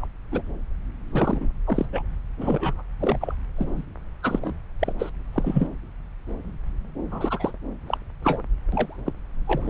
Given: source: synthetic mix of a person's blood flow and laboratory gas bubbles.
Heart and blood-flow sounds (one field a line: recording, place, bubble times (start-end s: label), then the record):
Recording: Doppler ultrasound of blood flow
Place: subclavian vein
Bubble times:
0.00-0.06 s: bubbles
0.32-0.42 s: bubbles
1.12-1.49 s: bubbles
1.67-1.85 s: bubbles
1.92-2.02 s: bubbles
2.40-2.83 s: bubbles
3.00-3.17 s: bubbles
3.21-3.35 s: bubbles
3.56-3.85 s: bubbles
4.22-4.54 s: bubbles
4.79-4.92 s: bubbles
4.99-5.09 s: bubbles
5.33-5.68 s: bubbles
7.11-7.51 s: bubbles
7.87-7.98 s: bubbles
8.23-8.42 s: bubbles
8.72-8.97 s: bubbles
9.06-9.12 s: bubbles
9.47-9.70 s: bubbles
From the record:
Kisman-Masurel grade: 232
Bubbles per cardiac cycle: several, 3 to 8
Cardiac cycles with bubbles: 50 to 99%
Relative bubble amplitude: moderate (0.250 to 0.450)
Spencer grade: 3 (all of the cardiac periods contain showers or single bubble signals, but not dominating or overriding the cardiac motion signals)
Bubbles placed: anywhere in the cardiac cycle